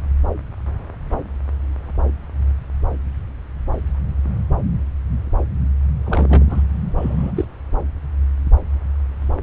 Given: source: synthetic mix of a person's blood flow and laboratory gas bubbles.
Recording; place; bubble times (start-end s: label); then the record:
Doppler ultrasound of blood flow; subclavian vein
6.04-6.46 s: bubbles
6.50-6.61 s: bubbles
6.97-7.32 s: bubbles
7.36-7.45 s: bubbles
From the record:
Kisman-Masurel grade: 122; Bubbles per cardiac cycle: 1 to 2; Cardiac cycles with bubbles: 10 to 50%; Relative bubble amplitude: moderate (0.250 to 0.450); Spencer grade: 2 (many but less than half of the cardiac periods contain bubble signals, singularly or in groups); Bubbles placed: anywhere in the cardiac cycle